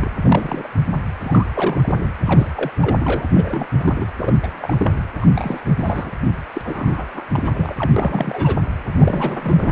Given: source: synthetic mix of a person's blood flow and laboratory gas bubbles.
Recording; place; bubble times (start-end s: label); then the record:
Doppler ultrasound of blood flow; precordium
0.00-0.11 s: bubbles
0.23-0.68 s: bubbles
0.82-1.02 s: bubbles
1.22-1.47 s: bubbles
1.53-2.11 s: bubbles
2.25-2.50 s: bubbles
2.55-2.71 s: bubbles
2.81-2.96 s: bubbles
2.99-3.26 s: bubbles
3.29-3.67 s: bubbles
3.77-4.07 s: bubbles
4.18-4.92 s: bubbles
5.21-6.11 s: bubbles
6.54-7.08 s: bubbles
7.15-7.24 s: bubbles
7.29-7.75 s: bubbles
7.78-7.91 s: bubbles
7.96-8.57 s: bubbles
8.97-9.72 s: bubbles
From the record:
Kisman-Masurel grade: 342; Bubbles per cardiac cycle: rolling drumbeat, 9 or more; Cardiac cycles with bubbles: 100%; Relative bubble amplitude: moderate (0.250 to 0.450); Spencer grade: 3 (all of the cardiac periods contain showers or single bubble signals, but not dominating or overriding the cardiac motion signals); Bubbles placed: anywhere in the cardiac cycle